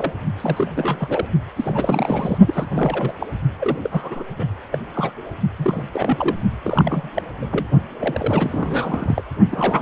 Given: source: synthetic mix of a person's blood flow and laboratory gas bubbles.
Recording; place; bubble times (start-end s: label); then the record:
Doppler ultrasound of blood flow; precordium
0.00-0.12 s: bubbles
0.38-1.25 s: bubbles
1.55-2.38 s: bubbles
2.46-3.14 s: bubbles
3.20-3.27 s: bubbles
3.59-3.80 s: bubbles
3.83-4.24 s: bubbles
4.35-4.45 s: bubbles
4.72-4.78 s: bubbles
4.94-5.12 s: bubbles
5.58-5.89 s: bubbles
5.92-6.37 s: bubbles
6.64-7.09 s: bubbles
7.14-7.23 s: bubbles
7.42-7.46 s: bubbles
7.51-7.67 s: bubbles
8.00-9.23 s: bubbles
9.51-9.82 s: bubbles
From the record:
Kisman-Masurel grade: 342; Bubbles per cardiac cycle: rolling drumbeat, 9 or more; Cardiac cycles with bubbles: 100%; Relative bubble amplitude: moderate (0.250 to 0.450); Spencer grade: 3 (all of the cardiac periods contain showers or single bubble signals, but not dominating or overriding the cardiac motion signals); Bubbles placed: only in the low amplitude regions of the cardiac cycle